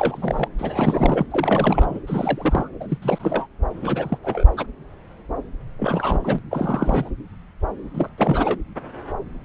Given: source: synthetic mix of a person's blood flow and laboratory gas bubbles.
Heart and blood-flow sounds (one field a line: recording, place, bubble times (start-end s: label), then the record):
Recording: Doppler ultrasound of blood flow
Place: subclavian vein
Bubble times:
0.00-0.48 s: bubbles
0.58-1.26 s: bubbles
1.30-1.99 s: bubbles
2.07-2.69 s: bubbles
2.80-2.98 s: bubbles
3.02-3.47 s: bubbles
3.81-4.18 s: bubbles
4.22-4.44 s: bubbles
4.57-4.66 s: bubbles
5.79-6.19 s: bubbles
6.24-6.38 s: bubbles
6.50-7.09 s: bubbles
7.94-8.09 s: bubbles
8.17-8.59 s: bubbles
From the record:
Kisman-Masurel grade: 332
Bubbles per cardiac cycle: rolling drumbeat, 9 or more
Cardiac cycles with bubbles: 50 to 99%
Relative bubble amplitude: moderate (0.250 to 0.450)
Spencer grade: 3 (all of the cardiac periods contain showers or single bubble signals, but not dominating or overriding the cardiac motion signals)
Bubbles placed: anywhere in the cardiac cycle